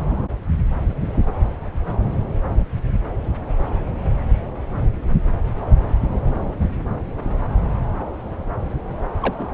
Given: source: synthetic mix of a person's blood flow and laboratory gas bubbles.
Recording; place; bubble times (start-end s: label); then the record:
Doppler ultrasound of blood flow; subclavian vein
9.20-9.34 s: bubbles
9.39-9.48 s: bubbles
From the record:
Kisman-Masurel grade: 112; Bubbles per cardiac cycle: 1 to 2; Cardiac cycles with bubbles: 1 to 10%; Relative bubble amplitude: moderate (0.250 to 0.450); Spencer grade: 1 (occasional bubble signal discernible with the cardiac motion signal, with majority of cardiac periods free of bubbles); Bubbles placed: anywhere in the cardiac cycle